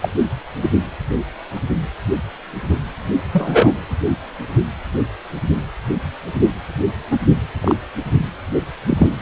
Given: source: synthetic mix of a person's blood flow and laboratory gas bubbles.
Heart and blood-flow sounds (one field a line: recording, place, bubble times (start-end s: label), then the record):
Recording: Doppler ultrasound of blood flow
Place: precordium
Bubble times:
0.02-0.09 s: bubbles
0.62-0.69 s: bubbles
3.33-3.73 s: bubbles
6.35-6.41 s: bubbles
6.70-6.73 s: bubbles
7.10-7.17 s: bubbles
7.61-7.75 s: bubbles
8.87-9.11 s: bubbles
From the record:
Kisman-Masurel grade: 123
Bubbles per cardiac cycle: 1 to 2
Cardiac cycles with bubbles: 10 to 50%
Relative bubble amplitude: loud (0.450 to 0.775)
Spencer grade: 2 (many but less than half of the cardiac periods contain bubble signals, singularly or in groups)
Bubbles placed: anywhere in the cardiac cycle